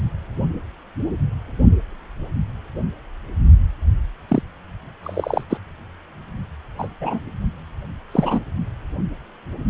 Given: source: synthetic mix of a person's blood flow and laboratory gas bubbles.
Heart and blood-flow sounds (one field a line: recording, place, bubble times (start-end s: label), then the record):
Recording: Doppler ultrasound of blood flow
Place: precordium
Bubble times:
4.28-4.42 s: bubbles
5.03-5.43 s: bubbles
5.50-5.58 s: bubbles
6.78-6.88 s: bubbles
7.00-7.18 s: bubbles
8.12-8.39 s: bubbles
From the record:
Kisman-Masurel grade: 123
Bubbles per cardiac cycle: 1 to 2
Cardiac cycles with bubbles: 10 to 50%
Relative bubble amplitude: loud (0.450 to 0.775)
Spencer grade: 2 (many but less than half of the cardiac periods contain bubble signals, singularly or in groups)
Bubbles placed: only in the low amplitude regions of the cardiac cycle